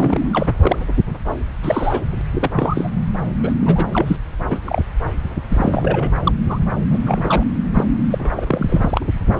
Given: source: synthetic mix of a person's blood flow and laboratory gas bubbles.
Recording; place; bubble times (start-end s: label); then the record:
Doppler ultrasound of blood flow; subclavian vein
0.00-0.28 s: bubbles
0.33-0.48 s: bubbles
0.61-0.78 s: bubbles
1.62-2.00 s: bubbles
2.09-2.21 s: bubbles
2.34-2.91 s: bubbles
3.42-3.54 s: bubbles
3.60-3.85 s: bubbles
3.93-4.17 s: bubbles
4.51-4.59 s: bubbles
4.64-4.82 s: bubbles
5.49-6.12 s: bubbles
6.24-6.33 s: bubbles
6.49-6.58 s: bubbles
6.89-6.97 s: bubbles
7.01-7.43 s: bubbles
7.73-7.84 s: bubbles
8.10-9.05 s: bubbles
9.36-9.40 s: bubbles
From the record:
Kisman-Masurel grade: 242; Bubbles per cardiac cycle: several, 3 to 8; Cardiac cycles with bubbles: 100%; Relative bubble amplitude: moderate (0.250 to 0.450); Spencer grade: 3 (all of the cardiac periods contain showers or single bubble signals, but not dominating or overriding the cardiac motion signals); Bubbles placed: anywhere in the cardiac cycle